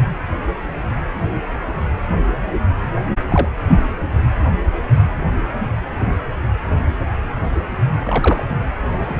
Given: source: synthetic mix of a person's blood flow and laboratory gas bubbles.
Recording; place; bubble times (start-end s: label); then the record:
Doppler ultrasound of blood flow; precordium
3.28-3.50 s: bubbles
8.03-8.43 s: bubbles
8.91-9.20 s: bubbles
From the record:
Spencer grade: 2 (many but less than half of the cardiac periods contain bubble signals, singularly or in groups); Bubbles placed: anywhere in the cardiac cycle